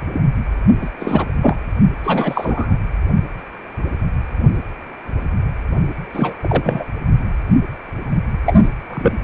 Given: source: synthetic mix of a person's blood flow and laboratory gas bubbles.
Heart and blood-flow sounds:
Doppler ultrasound of blood flow; precordium
0.00-0.36 s: bubbles
0.81-0.90 s: bubbles
1.00-1.26 s: bubbles
1.42-1.57 s: bubbles
2.04-2.76 s: bubbles
6.13-6.34 s: bubbles
6.41-6.84 s: bubbles
8.46-8.69 s: bubbles
8.90-9.17 s: bubbles
From the record:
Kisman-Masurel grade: 223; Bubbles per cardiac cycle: several, 3 to 8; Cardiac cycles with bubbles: 10 to 50%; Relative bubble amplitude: loud (0.450 to 0.775); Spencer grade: 2 (many but less than half of the cardiac periods contain bubble signals, singularly or in groups); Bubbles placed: only in the low amplitude regions of the cardiac cycle

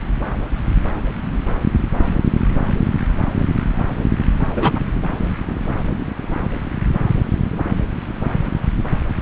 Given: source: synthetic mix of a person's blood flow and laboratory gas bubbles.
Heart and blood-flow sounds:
Doppler ultrasound of blood flow; subclavian vein
4.55-4.79 s: bubbles
From the record:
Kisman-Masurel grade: 113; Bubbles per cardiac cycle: 1 to 2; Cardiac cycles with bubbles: 1 to 10%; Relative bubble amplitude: loud (0.450 to 0.775); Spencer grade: 1 (occasional bubble signal discernible with the cardiac motion signal, with majority of cardiac periods free of bubbles); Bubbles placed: anywhere in the cardiac cycle

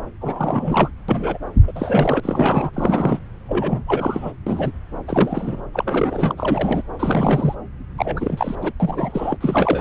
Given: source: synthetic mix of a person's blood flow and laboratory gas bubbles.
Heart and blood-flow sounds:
Doppler ultrasound of blood flow; subclavian vein
0.20-0.89 s: bubbles
1.08-1.38 s: bubbles
1.67-1.73 s: bubbles
1.75-2.20 s: bubbles
2.23-2.70 s: bubbles
2.73-3.19 s: bubbles
3.48-3.82 s: bubbles
3.86-4.32 s: bubbles
4.47-4.71 s: bubbles
5.07-5.62 s: bubbles
5.74-6.33 s: bubbles
6.37-6.82 s: bubbles
6.99-7.55 s: bubbles
7.98-8.55 s: bubbles
8.58-8.71 s: bubbles
8.80-9.37 s: bubbles
9.40-9.81 s: bubbles
From the record:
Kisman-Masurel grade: 332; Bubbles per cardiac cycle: rolling drumbeat, 9 or more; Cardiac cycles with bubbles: 50 to 99%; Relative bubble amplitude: moderate (0.250 to 0.450); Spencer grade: 3 (all of the cardiac periods contain showers or single bubble signals, but not dominating or overriding the cardiac motion signals); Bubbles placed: anywhere in the cardiac cycle

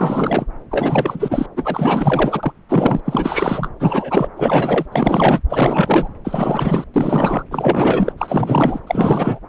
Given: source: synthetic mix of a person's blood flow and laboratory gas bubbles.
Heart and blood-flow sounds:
Doppler ultrasound of blood flow; subclavian vein
0.00-0.45 s: bubbles
0.70-1.46 s: bubbles
1.56-2.52 s: bubbles
2.69-3.00 s: bubbles
3.06-3.68 s: bubbles
3.79-4.28 s: bubbles
4.36-4.85 s: bubbles
4.92-5.39 s: bubbles
5.49-6.08 s: bubbles
6.24-6.84 s: bubbles
6.94-7.42 s: bubbles
7.51-8.12 s: bubbles
8.17-8.80 s: bubbles
8.87-9.40 s: bubbles
From the record:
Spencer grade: 4 (maximum detectable bubble signal sounding continuously throughout systole and diastole of every cardiac period, and overriding the amplitude of the normal cardiac signals); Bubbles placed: anywhere in the cardiac cycle

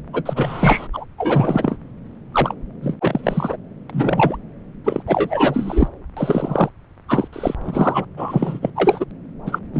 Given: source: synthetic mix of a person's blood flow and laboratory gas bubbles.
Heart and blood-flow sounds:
Doppler ultrasound of blood flow; subclavian vein
0.13-0.22 s: bubbles
0.26-0.88 s: bubbles
0.93-1.05 s: bubbles
1.18-1.77 s: bubbles
2.33-2.54 s: bubbles
2.81-2.96 s: bubbles
3.00-3.56 s: bubbles
3.89-4.37 s: bubbles
4.84-5.02 s: bubbles
5.07-5.88 s: bubbles
6.17-6.69 s: bubbles
7.08-7.28 s: bubbles
7.33-7.54 s: bubbles
7.64-8.04 s: bubbles
8.17-8.59 s: bubbles
8.62-8.70 s: bubbles
8.76-9.06 s: bubbles
9.46-9.59 s: bubbles
9.73-9.80 s: bubbles
From the record:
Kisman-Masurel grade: 343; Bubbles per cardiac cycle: rolling drumbeat, 9 or more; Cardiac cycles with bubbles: 100%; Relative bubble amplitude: loud (0.450 to 0.775); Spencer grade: 3 (all of the cardiac periods contain showers or single bubble signals, but not dominating or overriding the cardiac motion signals); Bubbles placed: anywhere in the cardiac cycle

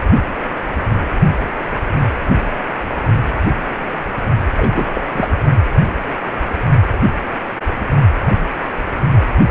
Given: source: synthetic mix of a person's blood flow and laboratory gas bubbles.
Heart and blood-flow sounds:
Doppler ultrasound of blood flow; precordium
4.56-4.85 s: bubbles
4.95-5.01 s: bubbles
5.12-5.28 s: bubbles
From the record:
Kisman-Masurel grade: 212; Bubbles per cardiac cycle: several, 3 to 8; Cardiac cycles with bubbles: 1 to 10%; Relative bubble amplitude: moderate (0.250 to 0.450); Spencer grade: 1 (occasional bubble signal discernible with the cardiac motion signal, with majority of cardiac periods free of bubbles); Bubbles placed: only in the low amplitude regions of the cardiac cycle

